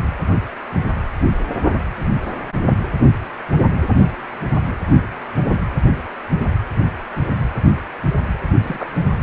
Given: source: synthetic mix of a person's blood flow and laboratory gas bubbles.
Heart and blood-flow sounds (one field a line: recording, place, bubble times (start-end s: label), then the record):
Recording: Doppler ultrasound of blood flow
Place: precordium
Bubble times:
8.62-8.96 s: bubbles
From the record:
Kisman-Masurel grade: 111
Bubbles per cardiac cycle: 1 to 2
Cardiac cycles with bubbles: 1 to 10%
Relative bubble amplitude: barely perceptible (0.100 to 0.250)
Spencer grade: 1 (occasional bubble signal discernible with the cardiac motion signal, with majority of cardiac periods free of bubbles)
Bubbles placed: anywhere in the cardiac cycle